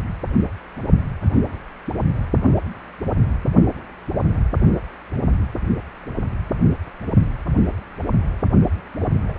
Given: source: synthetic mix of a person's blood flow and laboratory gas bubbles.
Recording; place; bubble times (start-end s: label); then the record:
Doppler ultrasound of blood flow; precordium
8.99-9.05 s: bubbles
9.28-9.38 s: bubbles
From the record:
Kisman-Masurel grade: 111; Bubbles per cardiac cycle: 1 to 2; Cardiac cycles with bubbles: 1 to 10%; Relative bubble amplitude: barely perceptible (0.100 to 0.250); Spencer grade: 1 (occasional bubble signal discernible with the cardiac motion signal, with majority of cardiac periods free of bubbles); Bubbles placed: only in the low amplitude regions of the cardiac cycle